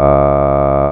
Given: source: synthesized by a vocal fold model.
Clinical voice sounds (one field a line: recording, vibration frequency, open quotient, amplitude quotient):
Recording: sustained vowel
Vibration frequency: 70 Hz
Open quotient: 0.4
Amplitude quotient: 1.3